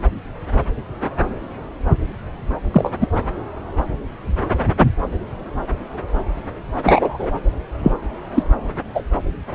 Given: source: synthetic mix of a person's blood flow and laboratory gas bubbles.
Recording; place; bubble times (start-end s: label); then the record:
Doppler ultrasound of blood flow; subclavian vein
2.72-2.91 s: bubbles
3.00-3.07 s: bubbles
6.84-7.30 s: bubbles
7.83-7.93 s: bubbles
8.35-8.43 s: bubbles
8.95-9.03 s: bubbles
From the record:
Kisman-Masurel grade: 123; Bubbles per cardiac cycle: 1 to 2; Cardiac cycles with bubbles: 10 to 50%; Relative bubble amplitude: loud (0.450 to 0.775); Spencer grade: 2 (many but less than half of the cardiac periods contain bubble signals, singularly or in groups); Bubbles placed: anywhere in the cardiac cycle